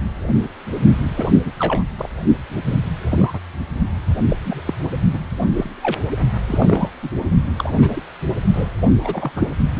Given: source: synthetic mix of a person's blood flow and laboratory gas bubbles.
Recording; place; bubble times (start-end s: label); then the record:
Doppler ultrasound of blood flow; precordium
0.00-0.02 s: bubbles
1.15-1.30 s: bubbles
1.44-1.52 s: bubbles
1.59-1.83 s: bubbles
1.98-2.09 s: bubbles
2.66-2.80 s: bubbles
3.11-3.40 s: bubbles
4.29-4.37 s: bubbles
4.45-4.74 s: bubbles
5.13-5.18 s: bubbles
5.53-5.70 s: bubbles
5.83-5.98 s: bubbles
6.47-6.91 s: bubbles
7.02-7.10 s: bubbles
7.58-7.72 s: bubbles
7.77-8.01 s: bubbles
8.53-8.69 s: bubbles
9.03-9.31 s: bubbles
9.36-9.49 s: bubbles
9.76-9.80 s: bubbles
From the record:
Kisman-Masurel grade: 242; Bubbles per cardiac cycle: several, 3 to 8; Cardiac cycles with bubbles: 100%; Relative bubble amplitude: moderate (0.250 to 0.450); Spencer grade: 3 (all of the cardiac periods contain showers or single bubble signals, but not dominating or overriding the cardiac motion signals); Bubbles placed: only in the low amplitude regions of the cardiac cycle